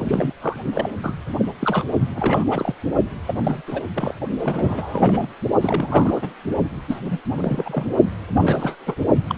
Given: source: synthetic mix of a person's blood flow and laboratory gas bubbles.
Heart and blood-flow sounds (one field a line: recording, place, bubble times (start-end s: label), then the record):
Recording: Doppler ultrasound of blood flow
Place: precordium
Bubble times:
0.00-0.33 s: bubbles
0.41-0.59 s: bubbles
0.75-0.90 s: bubbles
1.03-1.17 s: bubbles
1.38-1.45 s: bubbles
1.59-1.84 s: bubbles
2.15-2.44 s: bubbles
2.50-2.75 s: bubbles
3.26-3.39 s: bubbles
3.43-3.61 s: bubbles
3.66-3.82 s: bubbles
3.94-4.14 s: bubbles
4.38-5.27 s: bubbles
5.61-6.33 s: bubbles
6.88-6.99 s: bubbles
7.04-7.20 s: bubbles
7.37-7.86 s: bubbles
8.36-8.76 s: bubbles
8.80-8.96 s: bubbles
9.27-9.38 s: bubbles
From the record:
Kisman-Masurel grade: 342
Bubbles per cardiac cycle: rolling drumbeat, 9 or more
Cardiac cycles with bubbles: 100%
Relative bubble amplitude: moderate (0.250 to 0.450)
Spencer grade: 3 (all of the cardiac periods contain showers or single bubble signals, but not dominating or overriding the cardiac motion signals)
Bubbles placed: only in the low amplitude regions of the cardiac cycle